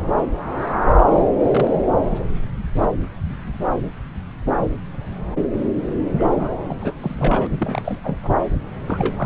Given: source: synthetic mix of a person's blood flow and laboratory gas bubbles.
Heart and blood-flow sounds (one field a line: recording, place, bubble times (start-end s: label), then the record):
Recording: Doppler ultrasound of blood flow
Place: subclavian vein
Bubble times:
1.12-1.26 s: bubbles
1.50-1.78 s: bubbles
6.18-6.29 s: bubbles
6.33-6.58 s: bubbles
6.68-6.75 s: bubbles
6.80-6.95 s: bubbles
6.99-7.47 s: bubbles
7.50-8.00 s: bubbles
8.03-8.18 s: bubbles
8.23-8.33 s: bubbles
8.86-9.25 s: bubbles
From the record:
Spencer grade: 2 (many but less than half of the cardiac periods contain bubble signals, singularly or in groups)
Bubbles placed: anywhere in the cardiac cycle